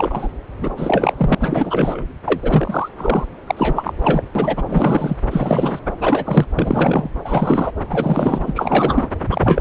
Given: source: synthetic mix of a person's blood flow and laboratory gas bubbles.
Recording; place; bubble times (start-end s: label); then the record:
Doppler ultrasound of blood flow; subclavian vein
0.00-0.28 s: bubbles
0.61-0.71 s: bubbles
0.77-1.14 s: bubbles
1.18-1.35 s: bubbles
1.40-2.04 s: bubbles
2.25-2.89 s: bubbles
2.97-3.25 s: bubbles
3.46-3.93 s: bubbles
4.02-4.23 s: bubbles
4.35-4.62 s: bubbles
4.68-5.18 s: bubbles
5.30-5.79 s: bubbles
6.00-6.46 s: bubbles
6.56-7.09 s: bubbles
7.24-7.72 s: bubbles
7.89-9.07 s: bubbles
9.22-9.61 s: bubbles
From the record:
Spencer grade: 3 (all of the cardiac periods contain showers or single bubble signals, but not dominating or overriding the cardiac motion signals); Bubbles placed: anywhere in the cardiac cycle